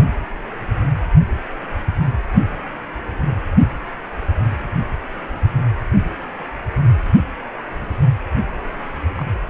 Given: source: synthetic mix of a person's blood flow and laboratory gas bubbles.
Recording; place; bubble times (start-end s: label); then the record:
Doppler ultrasound of blood flow; precordium
9.09-9.14 s: bubbles
9.16-9.24 s: bubbles
From the record:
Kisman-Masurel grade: 111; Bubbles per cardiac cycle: 1 to 2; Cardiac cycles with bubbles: 1 to 10%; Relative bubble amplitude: barely perceptible (0.100 to 0.250); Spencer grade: 1 (occasional bubble signal discernible with the cardiac motion signal, with majority of cardiac periods free of bubbles); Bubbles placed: only in the low amplitude regions of the cardiac cycle